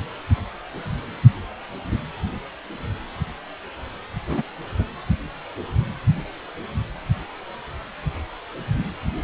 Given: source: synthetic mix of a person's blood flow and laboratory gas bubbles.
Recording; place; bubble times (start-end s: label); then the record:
Doppler ultrasound of blood flow; precordium
4.26-4.42 s: bubbles
4.78-4.84 s: bubbles
From the record:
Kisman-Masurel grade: 112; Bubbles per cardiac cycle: 1 to 2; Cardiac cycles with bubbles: 1 to 10%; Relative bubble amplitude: moderate (0.250 to 0.450); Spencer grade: 1 (occasional bubble signal discernible with the cardiac motion signal, with majority of cardiac periods free of bubbles); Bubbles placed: anywhere in the cardiac cycle